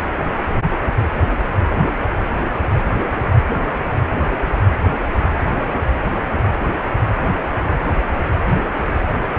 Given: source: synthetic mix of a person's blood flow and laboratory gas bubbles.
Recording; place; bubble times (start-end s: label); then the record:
Doppler ultrasound of blood flow; precordium
no bubbles
From the record:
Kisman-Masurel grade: 000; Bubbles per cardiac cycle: 0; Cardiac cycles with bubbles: 0%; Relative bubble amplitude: no bubbles discernible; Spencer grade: 0 (complete lack of bubble signals)